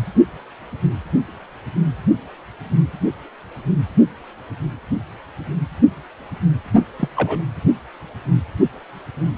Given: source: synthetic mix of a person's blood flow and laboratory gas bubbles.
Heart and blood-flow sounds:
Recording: Doppler ultrasound of blood flow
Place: precordium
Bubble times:
7.00-7.08 s: bubbles
7.16-7.43 s: bubbles
From the record:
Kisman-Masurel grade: 112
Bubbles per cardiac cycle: 1 to 2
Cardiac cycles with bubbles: 1 to 10%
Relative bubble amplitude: moderate (0.250 to 0.450)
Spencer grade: 1 (occasional bubble signal discernible with the cardiac motion signal, with majority of cardiac periods free of bubbles)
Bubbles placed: anywhere in the cardiac cycle

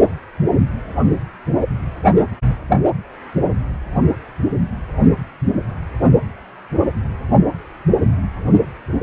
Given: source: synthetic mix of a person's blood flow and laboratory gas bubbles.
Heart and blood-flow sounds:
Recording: Doppler ultrasound of blood flow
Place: precordium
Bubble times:
no bubbles
From the record:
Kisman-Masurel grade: 000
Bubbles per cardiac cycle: 0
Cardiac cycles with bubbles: 0%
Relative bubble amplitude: no bubbles discernible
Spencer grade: 0 (complete lack of bubble signals)

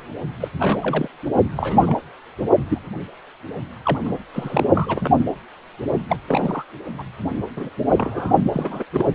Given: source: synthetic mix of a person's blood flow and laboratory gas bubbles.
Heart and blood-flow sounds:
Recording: Doppler ultrasound of blood flow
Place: precordium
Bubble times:
0.40-0.48 s: bubbles
0.59-1.08 s: bubbles
1.56-1.97 s: bubbles
2.69-2.78 s: bubbles
3.83-3.99 s: bubbles
4.05-4.18 s: bubbles
4.33-4.64 s: bubbles
4.73-5.14 s: bubbles
6.08-6.17 s: bubbles
6.27-6.64 s: bubbles
6.98-7.04 s: bubbles
7.56-7.69 s: bubbles
7.88-8.33 s: bubbles
8.43-8.84 s: bubbles
8.94-9.05 s: bubbles
From the record:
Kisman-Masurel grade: 242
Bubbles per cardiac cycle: several, 3 to 8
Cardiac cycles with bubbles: 100%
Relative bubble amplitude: moderate (0.250 to 0.450)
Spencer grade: 3 (all of the cardiac periods contain showers or single bubble signals, but not dominating or overriding the cardiac motion signals)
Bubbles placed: only in the low amplitude regions of the cardiac cycle

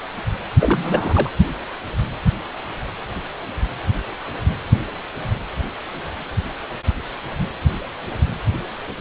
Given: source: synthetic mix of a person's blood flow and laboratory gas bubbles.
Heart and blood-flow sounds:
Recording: Doppler ultrasound of blood flow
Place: precordium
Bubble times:
0.58-1.30 s: bubbles
From the record:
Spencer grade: 1 (occasional bubble signal discernible with the cardiac motion signal, with majority of cardiac periods free of bubbles)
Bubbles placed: anywhere in the cardiac cycle

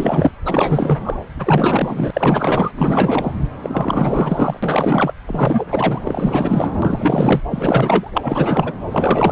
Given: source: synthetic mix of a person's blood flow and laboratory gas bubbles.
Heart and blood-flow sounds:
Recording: Doppler ultrasound of blood flow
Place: subclavian vein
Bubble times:
0.00-0.31 s: bubbles
0.45-0.99 s: bubbles
1.03-1.18 s: bubbles
1.39-2.10 s: bubbles
2.13-2.71 s: bubbles
2.77-3.35 s: bubbles
3.62-5.13 s: bubbles
5.26-5.64 s: bubbles
5.68-6.01 s: bubbles
6.04-6.77 s: bubbles
6.82-7.42 s: bubbles
7.50-8.11 s: bubbles
8.14-8.74 s: bubbles
8.90-9.32 s: bubbles
From the record:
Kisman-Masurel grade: 444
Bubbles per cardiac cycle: continuous sound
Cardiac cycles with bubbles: 100%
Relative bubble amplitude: maximal (0.775 to 0.999)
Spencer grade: 4 (maximum detectable bubble signal sounding continuously throughout systole and diastole of every cardiac period, and overriding the amplitude of the normal cardiac signals)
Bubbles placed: anywhere in the cardiac cycle

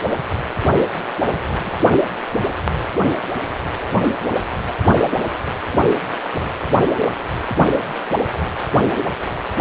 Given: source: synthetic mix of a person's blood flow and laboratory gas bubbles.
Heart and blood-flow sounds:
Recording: Doppler ultrasound of blood flow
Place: precordium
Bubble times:
1.22-1.74 s: bubbles
From the record:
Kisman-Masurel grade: 121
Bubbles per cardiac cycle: 1 to 2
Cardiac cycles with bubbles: 10 to 50%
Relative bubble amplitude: barely perceptible (0.100 to 0.250)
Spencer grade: 2 (many but less than half of the cardiac periods contain bubble signals, singularly or in groups)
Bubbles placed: only in the low amplitude regions of the cardiac cycle

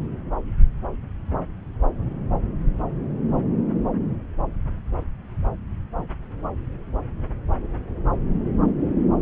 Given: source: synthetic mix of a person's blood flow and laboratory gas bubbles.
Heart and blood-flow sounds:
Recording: Doppler ultrasound of blood flow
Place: subclavian vein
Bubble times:
no bubbles
From the record:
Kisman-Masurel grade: 000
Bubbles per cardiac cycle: 0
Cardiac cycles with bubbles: 0%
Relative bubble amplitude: no bubbles discernible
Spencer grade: 0 (complete lack of bubble signals)

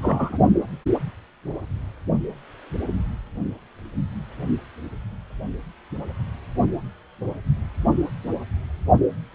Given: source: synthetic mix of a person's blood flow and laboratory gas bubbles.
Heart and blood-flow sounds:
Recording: Doppler ultrasound of blood flow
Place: precordium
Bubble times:
0.00-0.38 s: bubbles
From the record:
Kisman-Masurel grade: 212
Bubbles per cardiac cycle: several, 3 to 8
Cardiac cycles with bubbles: 1 to 10%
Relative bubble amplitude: moderate (0.250 to 0.450)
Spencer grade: 1 (occasional bubble signal discernible with the cardiac motion signal, with majority of cardiac periods free of bubbles)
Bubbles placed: only in the low amplitude regions of the cardiac cycle

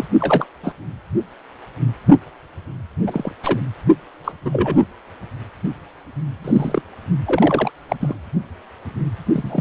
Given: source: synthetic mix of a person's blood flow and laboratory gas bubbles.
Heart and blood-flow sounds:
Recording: Doppler ultrasound of blood flow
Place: precordium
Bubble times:
0.00-0.05 s: bubbles
0.20-0.46 s: bubbles
0.63-0.73 s: bubbles
3.06-3.32 s: bubbles
3.43-3.60 s: bubbles
4.24-4.32 s: bubbles
4.44-4.84 s: bubbles
6.44-6.82 s: bubbles
7.26-7.70 s: bubbles
7.88-7.96 s: bubbles
8.00-8.14 s: bubbles
9.33-9.61 s: bubbles
From the record:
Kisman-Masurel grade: 232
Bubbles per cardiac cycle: several, 3 to 8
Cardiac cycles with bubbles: 50 to 99%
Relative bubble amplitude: moderate (0.250 to 0.450)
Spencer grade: 3 (all of the cardiac periods contain showers or single bubble signals, but not dominating or overriding the cardiac motion signals)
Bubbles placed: anywhere in the cardiac cycle

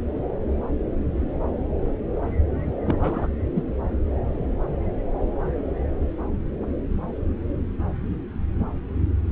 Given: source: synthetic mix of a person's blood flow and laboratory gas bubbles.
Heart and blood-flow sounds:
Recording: Doppler ultrasound of blood flow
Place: subclavian vein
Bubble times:
2.85-3.27 s: bubbles
3.55-3.62 s: bubbles
From the record:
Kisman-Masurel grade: 112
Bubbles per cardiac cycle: 1 to 2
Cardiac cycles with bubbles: 1 to 10%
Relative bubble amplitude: moderate (0.250 to 0.450)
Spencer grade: 1 (occasional bubble signal discernible with the cardiac motion signal, with majority of cardiac periods free of bubbles)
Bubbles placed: anywhere in the cardiac cycle

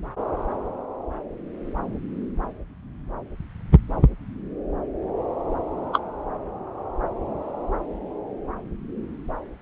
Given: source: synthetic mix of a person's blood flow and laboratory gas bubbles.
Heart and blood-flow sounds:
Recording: Doppler ultrasound of blood flow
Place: subclavian vein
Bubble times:
5.93-6.00 s: bubbles
From the record:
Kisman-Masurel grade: 112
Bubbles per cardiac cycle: 1 to 2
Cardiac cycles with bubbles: 1 to 10%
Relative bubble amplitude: moderate (0.250 to 0.450)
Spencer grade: 1 (occasional bubble signal discernible with the cardiac motion signal, with majority of cardiac periods free of bubbles)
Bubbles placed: anywhere in the cardiac cycle

